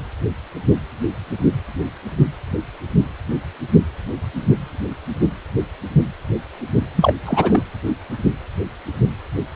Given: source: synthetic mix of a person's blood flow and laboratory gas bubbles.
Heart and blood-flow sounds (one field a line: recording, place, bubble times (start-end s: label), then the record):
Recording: Doppler ultrasound of blood flow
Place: precordium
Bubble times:
6.95-7.13 s: bubbles
7.25-7.62 s: bubbles
From the record:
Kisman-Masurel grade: 213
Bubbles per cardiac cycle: several, 3 to 8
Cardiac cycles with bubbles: 1 to 10%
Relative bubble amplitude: loud (0.450 to 0.775)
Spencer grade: 1 (occasional bubble signal discernible with the cardiac motion signal, with majority of cardiac periods free of bubbles)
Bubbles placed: anywhere in the cardiac cycle